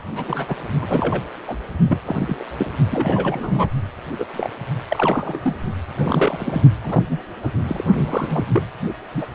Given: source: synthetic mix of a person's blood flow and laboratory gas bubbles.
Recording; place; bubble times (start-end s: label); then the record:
Doppler ultrasound of blood flow; precordium
0.00-0.02 s: bubbles
0.13-0.55 s: bubbles
0.81-1.24 s: bubbles
1.48-1.57 s: bubbles
1.88-2.00 s: bubbles
2.06-2.15 s: bubbles
2.19-2.45 s: bubbles
2.58-2.70 s: bubbles
2.90-3.69 s: bubbles
4.18-4.25 s: bubbles
4.33-4.50 s: bubbles
4.89-5.40 s: bubbles
5.43-5.55 s: bubbles
5.98-6.62 s: bubbles
6.82-7.17 s: bubbles
7.42-7.51 s: bubbles
7.68-7.83 s: bubbles
7.95-8.46 s: bubbles
8.53-8.62 s: bubbles
9.14-9.26 s: bubbles
From the record:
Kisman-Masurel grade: 242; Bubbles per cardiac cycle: several, 3 to 8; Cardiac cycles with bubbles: 100%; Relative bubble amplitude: moderate (0.250 to 0.450); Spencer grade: 3 (all of the cardiac periods contain showers or single bubble signals, but not dominating or overriding the cardiac motion signals); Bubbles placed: only in the low amplitude regions of the cardiac cycle